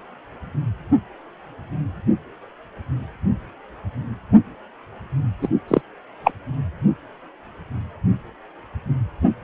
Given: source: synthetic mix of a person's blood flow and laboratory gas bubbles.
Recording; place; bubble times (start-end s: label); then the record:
Doppler ultrasound of blood flow; precordium
5.42-5.48 s: bubbles
5.68-5.81 s: bubbles
6.24-6.31 s: bubbles
From the record:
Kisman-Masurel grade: 213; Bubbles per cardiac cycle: several, 3 to 8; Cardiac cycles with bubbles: 1 to 10%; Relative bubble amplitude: loud (0.450 to 0.775); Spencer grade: 1 (occasional bubble signal discernible with the cardiac motion signal, with majority of cardiac periods free of bubbles); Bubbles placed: anywhere in the cardiac cycle